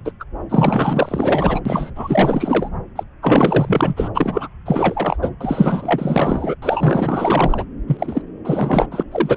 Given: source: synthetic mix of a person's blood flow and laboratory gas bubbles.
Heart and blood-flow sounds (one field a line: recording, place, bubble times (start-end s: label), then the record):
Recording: Doppler ultrasound of blood flow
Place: subclavian vein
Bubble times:
0.05-0.12 s: bubbles
0.20-0.24 s: bubbles
0.49-1.60 s: bubbles
1.65-1.90 s: bubbles
1.96-2.69 s: bubbles
2.96-3.03 s: bubbles
3.22-4.08 s: bubbles
4.14-4.48 s: bubbles
4.66-5.17 s: bubbles
5.22-5.29 s: bubbles
5.41-6.55 s: bubbles
6.62-7.65 s: bubbles
7.87-8.22 s: bubbles
8.44-8.86 s: bubbles
8.91-9.03 s: bubbles
9.12-9.37 s: bubbles
From the record:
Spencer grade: 4 (maximum detectable bubble signal sounding continuously throughout systole and diastole of every cardiac period, and overriding the amplitude of the normal cardiac signals)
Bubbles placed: anywhere in the cardiac cycle